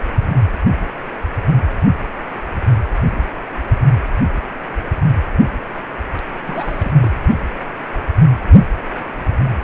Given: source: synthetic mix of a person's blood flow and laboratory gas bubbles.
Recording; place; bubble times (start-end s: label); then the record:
Doppler ultrasound of blood flow; precordium
6.45-6.93 s: bubbles
7.02-7.23 s: bubbles
From the record:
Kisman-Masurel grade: 211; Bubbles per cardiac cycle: several, 3 to 8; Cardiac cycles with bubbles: 1 to 10%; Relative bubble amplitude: barely perceptible (0.100 to 0.250); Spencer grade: 1 (occasional bubble signal discernible with the cardiac motion signal, with majority of cardiac periods free of bubbles); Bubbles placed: anywhere in the cardiac cycle